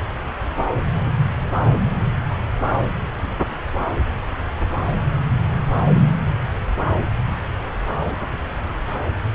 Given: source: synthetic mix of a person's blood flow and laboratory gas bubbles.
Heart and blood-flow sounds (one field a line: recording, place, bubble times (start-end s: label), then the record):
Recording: Doppler ultrasound of blood flow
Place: subclavian vein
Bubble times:
7.97-8.12 s: bubbles
From the record:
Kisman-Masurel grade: 122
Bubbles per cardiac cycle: 1 to 2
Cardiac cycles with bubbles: 10 to 50%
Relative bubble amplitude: moderate (0.250 to 0.450)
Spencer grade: 2 (many but less than half of the cardiac periods contain bubble signals, singularly or in groups)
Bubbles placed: anywhere in the cardiac cycle